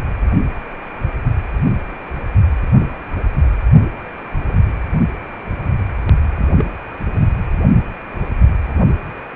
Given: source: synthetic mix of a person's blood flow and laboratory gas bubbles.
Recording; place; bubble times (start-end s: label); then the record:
Doppler ultrasound of blood flow; precordium
4.48-4.53 s: bubbles
6.31-6.47 s: bubbles
6.58-6.64 s: bubbles
From the record:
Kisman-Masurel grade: 121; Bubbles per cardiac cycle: 1 to 2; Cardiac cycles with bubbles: 10 to 50%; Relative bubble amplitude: barely perceptible (0.100 to 0.250); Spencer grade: 2 (many but less than half of the cardiac periods contain bubble signals, singularly or in groups); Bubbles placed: only in the low amplitude regions of the cardiac cycle